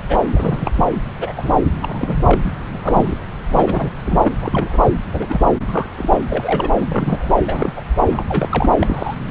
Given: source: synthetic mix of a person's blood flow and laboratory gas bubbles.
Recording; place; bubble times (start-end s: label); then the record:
Doppler ultrasound of blood flow; subclavian vein
0.09-0.19 s: bubbles
0.34-0.85 s: bubbles
1.19-1.33 s: bubbles
1.36-1.50 s: bubbles
1.82-2.56 s: bubbles
2.68-3.17 s: bubbles
3.49-3.91 s: bubbles
4.05-4.29 s: bubbles
4.38-4.89 s: bubbles
5.12-5.26 s: bubbles
5.29-5.41 s: bubbles
5.67-5.89 s: bubbles
5.97-6.21 s: bubbles
6.29-6.70 s: bubbles
6.81-7.32 s: bubbles
7.46-7.72 s: bubbles
7.76-7.83 s: bubbles
8.11-8.24 s: bubbles
8.28-8.70 s: bubbles
8.79-9.15 s: bubbles
From the record:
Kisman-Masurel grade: 242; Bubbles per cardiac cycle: several, 3 to 8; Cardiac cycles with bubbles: 100%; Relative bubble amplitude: moderate (0.250 to 0.450); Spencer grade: 3 (all of the cardiac periods contain showers or single bubble signals, but not dominating or overriding the cardiac motion signals); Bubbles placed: anywhere in the cardiac cycle